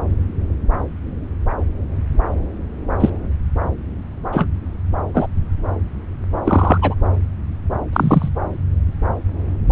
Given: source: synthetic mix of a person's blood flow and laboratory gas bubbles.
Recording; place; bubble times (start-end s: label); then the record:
Doppler ultrasound of blood flow; subclavian vein
3.00-3.10 s: bubbles
4.32-4.46 s: bubbles
5.14-5.26 s: bubbles
6.44-6.78 s: bubbles
6.82-6.95 s: bubbles
7.92-8.28 s: bubbles
9.70-9.72 s: bubbles
From the record:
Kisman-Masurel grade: 123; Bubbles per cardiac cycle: 1 to 2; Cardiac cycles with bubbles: 10 to 50%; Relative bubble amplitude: loud (0.450 to 0.775); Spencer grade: 2 (many but less than half of the cardiac periods contain bubble signals, singularly or in groups); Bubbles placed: anywhere in the cardiac cycle